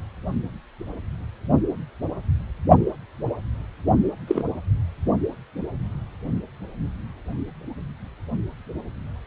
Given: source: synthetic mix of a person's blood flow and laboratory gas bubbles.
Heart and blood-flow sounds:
Doppler ultrasound of blood flow; precordium
4.27-4.44 s: bubbles
From the record:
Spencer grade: 1 (occasional bubble signal discernible with the cardiac motion signal, with majority of cardiac periods free of bubbles); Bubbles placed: only in the low amplitude regions of the cardiac cycle

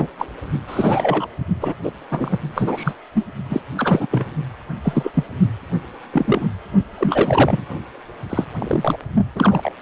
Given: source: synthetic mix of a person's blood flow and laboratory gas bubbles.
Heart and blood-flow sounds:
Doppler ultrasound of blood flow; precordium
0.00-0.07 s: bubbles
0.18-0.26 s: bubbles
0.67-1.28 s: bubbles
1.61-1.76 s: bubbles
1.83-1.92 s: bubbles
2.10-2.39 s: bubbles
2.55-2.93 s: bubbles
3.14-3.25 s: bubbles
3.49-3.60 s: bubbles
3.77-4.07 s: bubbles
4.11-4.25 s: bubbles
4.83-5.11 s: bubbles
5.13-5.24 s: bubbles
6.13-6.47 s: bubbles
6.97-7.63 s: bubbles
8.29-8.45 s: bubbles
8.59-8.97 s: bubbles
9.35-9.72 s: bubbles
From the record:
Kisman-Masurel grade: 243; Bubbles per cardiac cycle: several, 3 to 8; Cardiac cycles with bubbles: 100%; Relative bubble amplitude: loud (0.450 to 0.775); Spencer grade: 3 (all of the cardiac periods contain showers or single bubble signals, but not dominating or overriding the cardiac motion signals); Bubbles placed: only in the low amplitude regions of the cardiac cycle

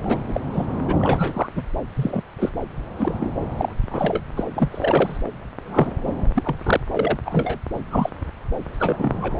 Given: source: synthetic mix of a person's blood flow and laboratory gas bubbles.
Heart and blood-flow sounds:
Doppler ultrasound of blood flow; subclavian vein
0.00-0.22 s: bubbles
0.28-0.41 s: bubbles
0.52-0.66 s: bubbles
0.87-0.95 s: bubbles
1.00-1.48 s: bubbles
1.55-1.66 s: bubbles
1.95-2.21 s: bubbles
2.38-2.50 s: bubbles
2.97-3.17 s: bubbles
3.20-3.32 s: bubbles
3.58-3.72 s: bubbles
3.90-4.21 s: bubbles
4.36-4.44 s: bubbles
4.56-5.17 s: bubbles
5.67-5.91 s: bubbles
6.07-6.12 s: bubbles
6.34-6.56 s: bubbles
6.63-6.80 s: bubbles
6.92-7.19 s: bubbles
7.25-7.58 s: bubbles
7.91-8.09 s: bubbles
8.79-9.33 s: bubbles
From the record:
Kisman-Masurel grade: 242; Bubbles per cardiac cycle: several, 3 to 8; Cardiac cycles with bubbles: 100%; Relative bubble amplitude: moderate (0.250 to 0.450); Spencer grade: 3 (all of the cardiac periods contain showers or single bubble signals, but not dominating or overriding the cardiac motion signals); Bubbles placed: anywhere in the cardiac cycle

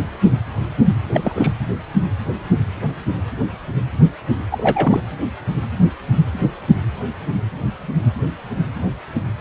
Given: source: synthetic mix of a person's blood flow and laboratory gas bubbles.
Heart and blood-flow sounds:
Doppler ultrasound of blood flow; precordium
1.13-1.51 s: bubbles
4.51-5.00 s: bubbles
From the record:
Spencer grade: 2 (many but less than half of the cardiac periods contain bubble signals, singularly or in groups); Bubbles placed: anywhere in the cardiac cycle

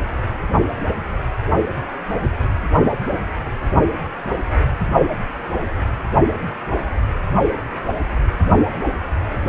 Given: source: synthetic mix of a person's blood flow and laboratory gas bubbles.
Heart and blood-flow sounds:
Doppler ultrasound of blood flow; precordium
no bubbles
From the record:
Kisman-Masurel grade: 000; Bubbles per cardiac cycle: 0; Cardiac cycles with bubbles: 0%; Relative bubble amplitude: no bubbles discernible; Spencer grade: 0 (complete lack of bubble signals)

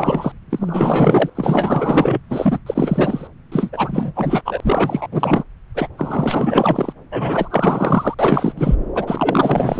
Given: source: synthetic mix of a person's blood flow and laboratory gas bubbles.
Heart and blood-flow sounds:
Doppler ultrasound of blood flow; subclavian vein
0.00-0.32 s: bubbles
0.49-1.30 s: bubbles
1.35-2.21 s: bubbles
2.29-2.59 s: bubbles
2.66-3.27 s: bubbles
3.51-4.42 s: bubbles
4.45-5.08 s: bubbles
5.12-5.43 s: bubbles
5.75-5.88 s: bubbles
5.97-6.92 s: bubbles
7.12-8.15 s: bubbles
8.19-8.54 s: bubbles
8.57-8.75 s: bubbles
8.95-9.79 s: bubbles
From the record:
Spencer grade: 4 (maximum detectable bubble signal sounding continuously throughout systole and diastole of every cardiac period, and overriding the amplitude of the normal cardiac signals); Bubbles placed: anywhere in the cardiac cycle

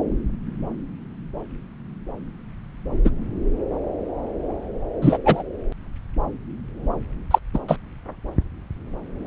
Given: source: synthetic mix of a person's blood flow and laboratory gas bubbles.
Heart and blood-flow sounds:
Doppler ultrasound of blood flow; subclavian vein
3.04-3.10 s: bubbles
5.01-5.17 s: bubbles
5.25-5.42 s: bubbles
7.30-7.39 s: bubbles
7.54-7.58 s: bubbles
7.68-7.76 s: bubbles
From the record:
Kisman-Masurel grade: 123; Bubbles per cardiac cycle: 1 to 2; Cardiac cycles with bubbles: 10 to 50%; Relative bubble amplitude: loud (0.450 to 0.775); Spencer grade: 2 (many but less than half of the cardiac periods contain bubble signals, singularly or in groups); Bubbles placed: anywhere in the cardiac cycle

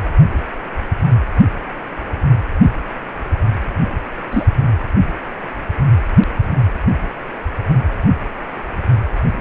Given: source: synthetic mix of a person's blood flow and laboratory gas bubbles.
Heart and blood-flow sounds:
Doppler ultrasound of blood flow; precordium
4.31-4.44 s: bubbles
From the record:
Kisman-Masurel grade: 123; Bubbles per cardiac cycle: 1 to 2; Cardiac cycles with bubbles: 10 to 50%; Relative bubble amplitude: loud (0.450 to 0.775); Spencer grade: 2 (many but less than half of the cardiac periods contain bubble signals, singularly or in groups); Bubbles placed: anywhere in the cardiac cycle

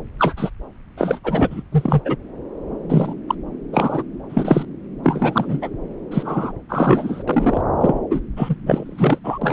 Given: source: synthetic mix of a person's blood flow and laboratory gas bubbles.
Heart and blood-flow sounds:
Doppler ultrasound of blood flow; subclavian vein
0.19-0.50 s: bubbles
0.97-1.19 s: bubbles
1.23-1.62 s: bubbles
1.72-2.01 s: bubbles
2.04-2.16 s: bubbles
2.89-3.15 s: bubbles
3.28-3.35 s: bubbles
3.72-4.03 s: bubbles
4.29-4.65 s: bubbles
5.04-5.70 s: bubbles
6.11-6.53 s: bubbles
6.69-7.23 s: bubbles
7.28-7.61 s: bubbles
7.80-7.99 s: bubbles
8.10-8.20 s: bubbles
8.36-8.55 s: bubbles
8.66-9.19 s: bubbles
9.24-9.38 s: bubbles
9.42-9.53 s: bubbles
From the record:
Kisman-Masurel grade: 243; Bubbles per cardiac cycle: several, 3 to 8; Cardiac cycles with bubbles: 100%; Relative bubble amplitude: loud (0.450 to 0.775); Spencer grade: 3 (all of the cardiac periods contain showers or single bubble signals, but not dominating or overriding the cardiac motion signals); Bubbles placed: anywhere in the cardiac cycle

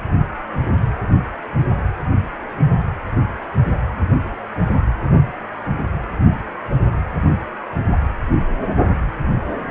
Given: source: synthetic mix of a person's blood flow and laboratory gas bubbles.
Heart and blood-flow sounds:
Doppler ultrasound of blood flow; precordium
no bubbles
From the record:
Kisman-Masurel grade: 000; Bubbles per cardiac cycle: 0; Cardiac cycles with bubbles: 0%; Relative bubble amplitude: no bubbles discernible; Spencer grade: 0 (complete lack of bubble signals)

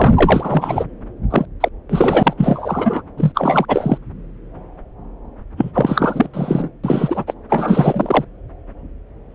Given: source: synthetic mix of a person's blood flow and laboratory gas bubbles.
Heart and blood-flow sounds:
Doppler ultrasound of blood flow; subclavian vein
0.00-0.13 s: bubbles
0.16-0.85 s: bubbles
1.30-1.46 s: bubbles
1.60-1.69 s: bubbles
1.89-2.33 s: bubbles
2.37-3.02 s: bubbles
3.17-3.32 s: bubbles
3.35-3.66 s: bubbles
3.68-3.98 s: bubbles
5.57-5.71 s: bubbles
5.73-6.27 s: bubbles
6.33-6.70 s: bubbles
6.83-7.34 s: bubbles
7.49-8.24 s: bubbles
From the record:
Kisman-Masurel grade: 333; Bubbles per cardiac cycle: rolling drumbeat, 9 or more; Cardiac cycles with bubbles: 50 to 99%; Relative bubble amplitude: loud (0.450 to 0.775); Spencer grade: 3 (all of the cardiac periods contain showers or single bubble signals, but not dominating or overriding the cardiac motion signals); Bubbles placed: anywhere in the cardiac cycle

